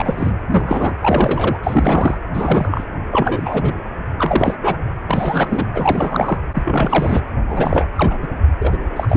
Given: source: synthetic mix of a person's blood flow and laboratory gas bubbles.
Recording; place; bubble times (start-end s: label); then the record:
Doppler ultrasound of blood flow; precordium
0.00-0.33 s: bubbles
0.50-0.94 s: bubbles
1.00-1.57 s: bubbles
1.63-2.17 s: bubbles
2.33-2.84 s: bubbles
3.10-3.74 s: bubbles
4.17-4.56 s: bubbles
4.62-4.77 s: bubbles
5.09-5.70 s: bubbles
5.74-6.38 s: bubbles
6.54-7.21 s: bubbles
7.47-7.88 s: bubbles
7.96-8.17 s: bubbles
8.21-8.28 s: bubbles
8.59-8.78 s: bubbles
8.96-9.17 s: bubbles
From the record:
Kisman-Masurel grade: 343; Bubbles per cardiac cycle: rolling drumbeat, 9 or more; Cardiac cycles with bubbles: 100%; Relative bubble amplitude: loud (0.450 to 0.775); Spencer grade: 3 (all of the cardiac periods contain showers or single bubble signals, but not dominating or overriding the cardiac motion signals); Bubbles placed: anywhere in the cardiac cycle